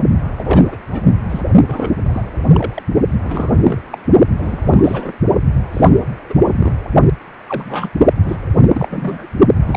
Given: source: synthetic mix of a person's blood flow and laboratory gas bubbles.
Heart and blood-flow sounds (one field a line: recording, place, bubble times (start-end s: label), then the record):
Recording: Doppler ultrasound of blood flow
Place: precordium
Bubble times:
0.37-1.07 s: bubbles
1.30-1.41 s: bubbles
1.67-1.94 s: bubbles
2.06-2.24 s: bubbles
2.50-2.82 s: bubbles
3.23-3.79 s: bubbles
3.91-3.98 s: bubbles
4.38-5.13 s: bubbles
5.72-5.90 s: bubbles
6.29-6.34 s: bubbles
6.47-6.72 s: bubbles
7.48-7.89 s: bubbles
7.95-8.00 s: bubbles
8.26-8.37 s: bubbles
8.73-9.27 s: bubbles
9.66-9.77 s: bubbles
From the record:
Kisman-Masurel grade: 242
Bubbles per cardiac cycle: several, 3 to 8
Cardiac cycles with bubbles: 100%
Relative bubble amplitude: moderate (0.250 to 0.450)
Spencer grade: 3 (all of the cardiac periods contain showers or single bubble signals, but not dominating or overriding the cardiac motion signals)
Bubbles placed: only in the low amplitude regions of the cardiac cycle